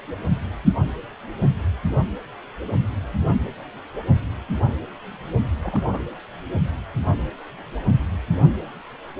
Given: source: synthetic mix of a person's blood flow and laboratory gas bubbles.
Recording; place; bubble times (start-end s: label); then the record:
Doppler ultrasound of blood flow; precordium
5.63-5.80 s: bubbles
5.92-5.99 s: bubbles
From the record:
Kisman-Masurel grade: 121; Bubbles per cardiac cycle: 1 to 2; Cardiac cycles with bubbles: 10 to 50%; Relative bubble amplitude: barely perceptible (0.100 to 0.250); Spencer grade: 2 (many but less than half of the cardiac periods contain bubble signals, singularly or in groups); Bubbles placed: only in the low amplitude regions of the cardiac cycle